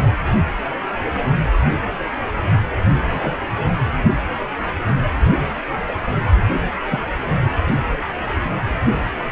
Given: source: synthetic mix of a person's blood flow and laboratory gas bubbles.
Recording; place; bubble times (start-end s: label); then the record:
Doppler ultrasound of blood flow; precordium
3.09-3.38 s: bubbles
6.91-6.99 s: bubbles
From the record:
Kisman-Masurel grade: 122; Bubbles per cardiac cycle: 1 to 2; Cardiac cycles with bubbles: 10 to 50%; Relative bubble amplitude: moderate (0.250 to 0.450); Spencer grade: 2 (many but less than half of the cardiac periods contain bubble signals, singularly or in groups); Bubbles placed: only in the low amplitude regions of the cardiac cycle